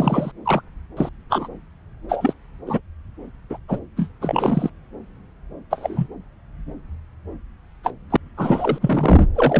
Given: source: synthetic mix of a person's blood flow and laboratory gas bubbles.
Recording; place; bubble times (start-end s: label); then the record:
Doppler ultrasound of blood flow; subclavian vein
0.00-0.31 s: bubbles
0.45-0.61 s: bubbles
0.96-1.09 s: bubbles
1.30-1.48 s: bubbles
2.08-2.33 s: bubbles
2.67-2.80 s: bubbles
3.49-3.57 s: bubbles
3.68-3.79 s: bubbles
3.96-4.08 s: bubbles
4.21-4.70 s: bubbles
5.71-6.07 s: bubbles
7.83-7.91 s: bubbles
8.10-8.16 s: bubbles
8.38-8.79 s: bubbles
8.81-9.24 s: bubbles
9.35-9.60 s: bubbles
From the record:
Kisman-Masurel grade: 242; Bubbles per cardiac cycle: several, 3 to 8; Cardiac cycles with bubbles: 100%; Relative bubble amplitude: moderate (0.250 to 0.450); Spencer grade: 3 (all of the cardiac periods contain showers or single bubble signals, but not dominating or overriding the cardiac motion signals); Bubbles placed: anywhere in the cardiac cycle